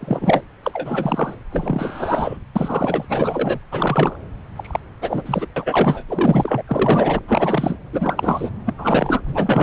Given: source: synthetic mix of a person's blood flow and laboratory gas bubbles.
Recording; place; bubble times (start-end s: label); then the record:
Doppler ultrasound of blood flow; subclavian vein
0.00-0.42 s: bubbles
0.62-1.34 s: bubbles
1.50-2.37 s: bubbles
2.55-3.05 s: bubbles
3.09-3.59 s: bubbles
3.71-4.19 s: bubbles
4.55-4.79 s: bubbles
5.01-5.46 s: bubbles
5.56-6.04 s: bubbles
6.08-6.62 s: bubbles
6.67-7.20 s: bubbles
7.27-7.78 s: bubbles
7.92-8.50 s: bubbles
8.66-8.74 s: bubbles
8.78-9.21 s: bubbles
9.26-9.63 s: bubbles
From the record:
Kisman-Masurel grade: 333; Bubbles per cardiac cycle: rolling drumbeat, 9 or more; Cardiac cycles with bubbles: 50 to 99%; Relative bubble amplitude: loud (0.450 to 0.775); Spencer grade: 3 (all of the cardiac periods contain showers or single bubble signals, but not dominating or overriding the cardiac motion signals); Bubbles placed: anywhere in the cardiac cycle